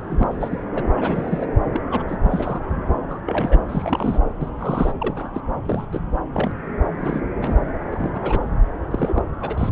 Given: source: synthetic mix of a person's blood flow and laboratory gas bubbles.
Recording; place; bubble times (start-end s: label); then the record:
Doppler ultrasound of blood flow; subclavian vein
0.00-0.27 s: bubbles
0.30-0.66 s: bubbles
0.74-0.83 s: bubbles
0.97-1.46 s: bubbles
1.73-1.81 s: bubbles
1.90-2.03 s: bubbles
2.08-2.17 s: bubbles
2.23-2.61 s: bubbles
2.72-2.79 s: bubbles
3.09-3.18 s: bubbles
3.26-3.58 s: bubbles
3.68-4.20 s: bubbles
4.41-4.50 s: bubbles
4.59-4.92 s: bubbles
5.00-5.31 s: bubbles
5.34-5.41 s: bubbles
5.65-5.86 s: bubbles
5.92-6.00 s: bubbles
6.33-6.51 s: bubbles
7.00-7.21 s: bubbles
7.42-7.59 s: bubbles
7.91-8.48 s: bubbles
8.90-9.22 s: bubbles
9.41-9.70 s: bubbles
From the record:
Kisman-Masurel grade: 242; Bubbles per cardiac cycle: several, 3 to 8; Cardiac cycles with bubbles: 100%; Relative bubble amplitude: moderate (0.250 to 0.450); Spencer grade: 3 (all of the cardiac periods contain showers or single bubble signals, but not dominating or overriding the cardiac motion signals); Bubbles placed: anywhere in the cardiac cycle